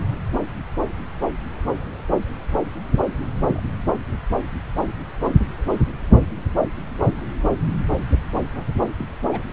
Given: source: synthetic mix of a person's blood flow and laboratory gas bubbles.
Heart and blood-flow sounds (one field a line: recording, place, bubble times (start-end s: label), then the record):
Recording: Doppler ultrasound of blood flow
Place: subclavian vein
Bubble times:
3.47-3.63 s: bubbles
8.55-8.64 s: bubbles
8.97-9.06 s: bubbles
9.32-9.45 s: bubbles
From the record:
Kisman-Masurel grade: 121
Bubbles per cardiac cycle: 1 to 2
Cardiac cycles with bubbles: 10 to 50%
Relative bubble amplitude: barely perceptible (0.100 to 0.250)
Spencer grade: 2 (many but less than half of the cardiac periods contain bubble signals, singularly or in groups)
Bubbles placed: anywhere in the cardiac cycle